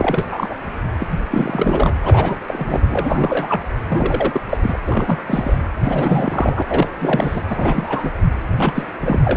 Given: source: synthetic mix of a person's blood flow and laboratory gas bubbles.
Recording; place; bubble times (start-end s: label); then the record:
Doppler ultrasound of blood flow; precordium
0.00-0.56 s: bubbles
0.99-1.07 s: bubbles
1.30-1.92 s: bubbles
2.01-2.38 s: bubbles
2.47-2.80 s: bubbles
2.90-3.62 s: bubbles
3.89-4.41 s: bubbles
4.49-4.58 s: bubbles
4.62-4.81 s: bubbles
4.85-5.22 s: bubbles
5.27-5.57 s: bubbles
5.83-6.62 s: bubbles
6.70-6.88 s: bubbles
6.99-7.42 s: bubbles
7.49-8.10 s: bubbles
8.58-8.83 s: bubbles
9.00-9.19 s: bubbles
9.24-9.37 s: bubbles
From the record:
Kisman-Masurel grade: 342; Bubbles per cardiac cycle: rolling drumbeat, 9 or more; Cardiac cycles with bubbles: 100%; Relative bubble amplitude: moderate (0.250 to 0.450); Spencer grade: 3 (all of the cardiac periods contain showers or single bubble signals, but not dominating or overriding the cardiac motion signals); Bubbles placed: anywhere in the cardiac cycle